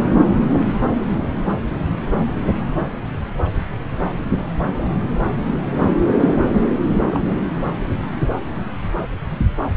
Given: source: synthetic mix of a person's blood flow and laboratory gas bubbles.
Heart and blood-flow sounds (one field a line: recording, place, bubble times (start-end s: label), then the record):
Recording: Doppler ultrasound of blood flow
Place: subclavian vein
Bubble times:
6.89-7.34 s: bubbles
From the record:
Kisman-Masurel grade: 122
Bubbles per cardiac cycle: 1 to 2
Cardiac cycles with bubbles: 10 to 50%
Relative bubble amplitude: moderate (0.250 to 0.450)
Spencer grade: 2 (many but less than half of the cardiac periods contain bubble signals, singularly or in groups)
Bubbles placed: anywhere in the cardiac cycle